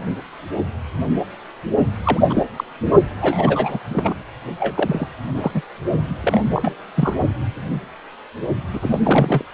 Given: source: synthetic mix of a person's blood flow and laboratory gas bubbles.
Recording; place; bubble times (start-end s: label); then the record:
Doppler ultrasound of blood flow; precordium
2.04-2.21 s: bubbles
2.29-2.45 s: bubbles
2.56-2.64 s: bubbles
3.21-3.79 s: bubbles
3.88-4.14 s: bubbles
4.59-5.08 s: bubbles
5.35-5.51 s: bubbles
5.54-5.62 s: bubbles
6.09-6.15 s: bubbles
6.21-6.40 s: bubbles
6.53-6.75 s: bubbles
6.95-7.13 s: bubbles
8.72-8.99 s: bubbles
9.03-9.44 s: bubbles
From the record:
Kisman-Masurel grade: 232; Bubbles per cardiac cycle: several, 3 to 8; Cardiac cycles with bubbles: 50 to 99%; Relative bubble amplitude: moderate (0.250 to 0.450); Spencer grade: 3 (all of the cardiac periods contain showers or single bubble signals, but not dominating or overriding the cardiac motion signals); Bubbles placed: only in the low amplitude regions of the cardiac cycle